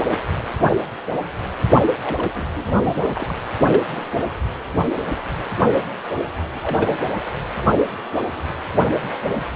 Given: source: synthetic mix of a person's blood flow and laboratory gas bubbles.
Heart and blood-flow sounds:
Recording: Doppler ultrasound of blood flow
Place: precordium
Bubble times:
2.04-2.29 s: bubbles
2.34-2.46 s: bubbles
2.56-3.25 s: bubbles
3.28-3.34 s: bubbles
3.59-3.81 s: bubbles
3.93-4.09 s: bubbles
6.54-6.97 s: bubbles
From the record:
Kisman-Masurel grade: 221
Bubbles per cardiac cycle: several, 3 to 8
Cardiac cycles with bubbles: 10 to 50%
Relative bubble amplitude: barely perceptible (0.100 to 0.250)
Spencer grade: 2 (many but less than half of the cardiac periods contain bubble signals, singularly or in groups)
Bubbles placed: anywhere in the cardiac cycle

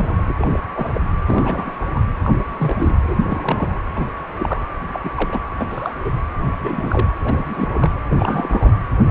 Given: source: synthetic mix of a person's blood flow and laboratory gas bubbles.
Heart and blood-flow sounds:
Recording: Doppler ultrasound of blood flow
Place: precordium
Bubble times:
0.00-0.34 s: bubbles
0.36-0.59 s: bubbles
0.76-1.01 s: bubbles
1.26-1.74 s: bubbles
1.95-2.02 s: bubbles
2.24-2.30 s: bubbles
2.57-3.17 s: bubbles
3.28-3.79 s: bubbles
3.95-4.04 s: bubbles
4.38-4.63 s: bubbles
4.92-5.10 s: bubbles
5.15-5.40 s: bubbles
5.58-5.67 s: bubbles
5.69-5.93 s: bubbles
6.04-6.11 s: bubbles
6.52-7.08 s: bubbles
7.25-7.93 s: bubbles
8.10-8.71 s: bubbles
9.07-9.11 s: bubbles
From the record:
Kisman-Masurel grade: 242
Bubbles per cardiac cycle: several, 3 to 8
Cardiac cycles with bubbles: 100%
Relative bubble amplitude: moderate (0.250 to 0.450)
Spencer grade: 3 (all of the cardiac periods contain showers or single bubble signals, but not dominating or overriding the cardiac motion signals)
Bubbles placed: anywhere in the cardiac cycle

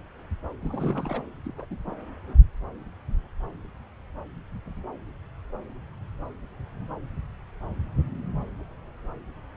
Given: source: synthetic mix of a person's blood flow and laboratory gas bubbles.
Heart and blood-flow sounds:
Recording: Doppler ultrasound of blood flow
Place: subclavian vein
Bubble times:
0.60-1.23 s: bubbles
1.45-1.52 s: bubbles
1.56-1.66 s: bubbles
1.71-1.78 s: bubbles
1.87-1.92 s: bubbles
From the record:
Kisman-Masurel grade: 221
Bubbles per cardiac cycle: several, 3 to 8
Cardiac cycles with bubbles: 10 to 50%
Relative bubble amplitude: barely perceptible (0.100 to 0.250)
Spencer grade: 2 (many but less than half of the cardiac periods contain bubble signals, singularly or in groups)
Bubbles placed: anywhere in the cardiac cycle

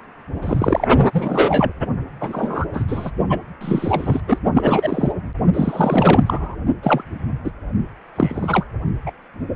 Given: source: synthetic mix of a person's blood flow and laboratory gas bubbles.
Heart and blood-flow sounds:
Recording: Doppler ultrasound of blood flow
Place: precordium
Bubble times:
0.42-0.86 s: bubbles
1.12-1.73 s: bubbles
2.21-2.65 s: bubbles
2.73-2.85 s: bubbles
2.88-3.11 s: bubbles
3.29-3.40 s: bubbles
3.60-4.21 s: bubbles
4.28-4.38 s: bubbles
4.54-5.12 s: bubbles
5.54-6.55 s: bubbles
6.83-7.04 s: bubbles
7.43-7.51 s: bubbles
8.15-8.66 s: bubbles
9.06-9.12 s: bubbles
From the record:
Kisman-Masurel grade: 243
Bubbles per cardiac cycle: several, 3 to 8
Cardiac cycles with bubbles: 100%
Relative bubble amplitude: loud (0.450 to 0.775)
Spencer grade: 3 (all of the cardiac periods contain showers or single bubble signals, but not dominating or overriding the cardiac motion signals)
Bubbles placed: only in the low amplitude regions of the cardiac cycle

